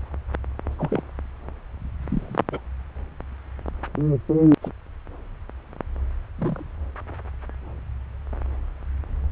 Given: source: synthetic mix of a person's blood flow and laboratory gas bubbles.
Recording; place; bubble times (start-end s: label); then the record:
Doppler ultrasound of blood flow; subclavian vein
0.78-1.01 s: bubbles
2.02-2.41 s: bubbles
2.52-2.60 s: bubbles
4.62-4.71 s: bubbles
6.38-6.65 s: bubbles
From the record:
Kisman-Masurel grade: 121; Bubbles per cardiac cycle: 1 to 2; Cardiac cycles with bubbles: 10 to 50%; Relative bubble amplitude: barely perceptible (0.100 to 0.250); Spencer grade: 2 (many but less than half of the cardiac periods contain bubble signals, singularly or in groups); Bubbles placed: anywhere in the cardiac cycle